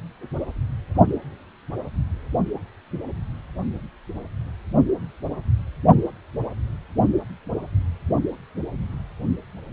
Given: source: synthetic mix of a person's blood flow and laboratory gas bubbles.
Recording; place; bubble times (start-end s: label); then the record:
Doppler ultrasound of blood flow; precordium
no bubbles
From the record:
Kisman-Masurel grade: 000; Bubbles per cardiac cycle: 0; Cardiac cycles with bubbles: 0%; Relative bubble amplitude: no bubbles discernible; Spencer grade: 0 (complete lack of bubble signals)